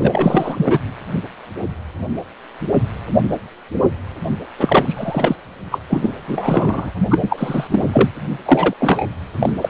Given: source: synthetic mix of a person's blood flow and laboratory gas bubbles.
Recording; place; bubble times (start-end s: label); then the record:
Doppler ultrasound of blood flow; precordium
0.00-0.79 s: bubbles
4.57-5.36 s: bubbles
5.71-5.79 s: bubbles
5.89-6.10 s: bubbles
6.27-6.92 s: bubbles
7.10-7.67 s: bubbles
7.71-7.83 s: bubbles
7.93-8.08 s: bubbles
8.45-8.73 s: bubbles
8.79-9.06 s: bubbles
9.39-9.53 s: bubbles
9.62-9.70 s: bubbles
From the record:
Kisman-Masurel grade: 333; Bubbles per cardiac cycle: rolling drumbeat, 9 or more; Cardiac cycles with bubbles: 50 to 99%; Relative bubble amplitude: loud (0.450 to 0.775); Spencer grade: 3 (all of the cardiac periods contain showers or single bubble signals, but not dominating or overriding the cardiac motion signals); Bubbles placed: only in the low amplitude regions of the cardiac cycle